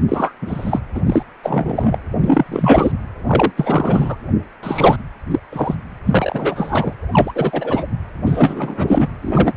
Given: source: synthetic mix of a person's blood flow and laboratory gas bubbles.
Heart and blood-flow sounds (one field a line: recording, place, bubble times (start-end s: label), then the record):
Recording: Doppler ultrasound of blood flow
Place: precordium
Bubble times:
0.08-0.32 s: bubbles
0.42-0.80 s: bubbles
0.95-1.01 s: bubbles
1.06-1.23 s: bubbles
1.43-1.99 s: bubbles
2.20-2.92 s: bubbles
3.27-3.52 s: bubbles
3.57-4.16 s: bubbles
4.63-4.96 s: bubbles
5.30-5.39 s: bubbles
5.52-5.75 s: bubbles
6.05-6.93 s: bubbles
7.12-7.32 s: bubbles
7.34-7.85 s: bubbles
8.26-9.08 s: bubbles
9.22-9.52 s: bubbles
From the record:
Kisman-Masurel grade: 343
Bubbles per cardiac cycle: rolling drumbeat, 9 or more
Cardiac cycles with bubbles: 100%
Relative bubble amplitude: loud (0.450 to 0.775)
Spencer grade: 3 (all of the cardiac periods contain showers or single bubble signals, but not dominating or overriding the cardiac motion signals)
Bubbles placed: anywhere in the cardiac cycle